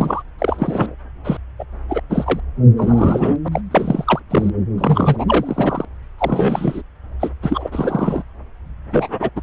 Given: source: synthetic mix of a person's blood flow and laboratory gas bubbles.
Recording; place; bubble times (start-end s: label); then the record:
Doppler ultrasound of blood flow; subclavian vein
0.00-0.23 s: bubbles
0.38-0.95 s: bubbles
1.24-1.37 s: bubbles
1.59-1.65 s: bubbles
1.89-2.00 s: bubbles
2.09-2.40 s: bubbles
2.77-3.36 s: bubbles
3.44-3.48 s: bubbles
3.52-3.61 s: bubbles
3.71-4.20 s: bubbles
4.30-4.50 s: bubbles
4.78-5.25 s: bubbles
5.28-5.85 s: bubbles
6.18-6.82 s: bubbles
7.20-7.30 s: bubbles
7.42-7.68 s: bubbles
7.72-8.23 s: bubbles
8.90-9.08 s: bubbles
9.20-9.29 s: bubbles
9.36-9.41 s: bubbles
From the record:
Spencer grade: 3 (all of the cardiac periods contain showers or single bubble signals, but not dominating or overriding the cardiac motion signals); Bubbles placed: anywhere in the cardiac cycle